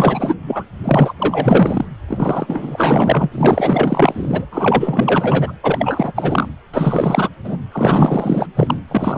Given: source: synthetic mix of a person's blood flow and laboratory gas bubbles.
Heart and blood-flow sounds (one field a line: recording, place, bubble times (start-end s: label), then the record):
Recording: Doppler ultrasound of blood flow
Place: precordium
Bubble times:
0.00-0.34 s: bubbles
0.46-0.64 s: bubbles
0.84-1.14 s: bubbles
1.19-1.85 s: bubbles
2.08-4.46 s: bubbles
4.51-5.53 s: bubbles
5.63-6.12 s: bubbles
6.15-6.47 s: bubbles
6.73-7.29 s: bubbles
7.44-7.58 s: bubbles
7.71-8.48 s: bubbles
8.56-8.81 s: bubbles
8.88-9.18 s: bubbles
From the record:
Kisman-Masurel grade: 444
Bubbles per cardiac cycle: continuous sound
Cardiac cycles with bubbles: 100%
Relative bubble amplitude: maximal (0.775 to 0.999)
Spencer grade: 4 (maximum detectable bubble signal sounding continuously throughout systole and diastole of every cardiac period, and overriding the amplitude of the normal cardiac signals)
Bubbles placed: anywhere in the cardiac cycle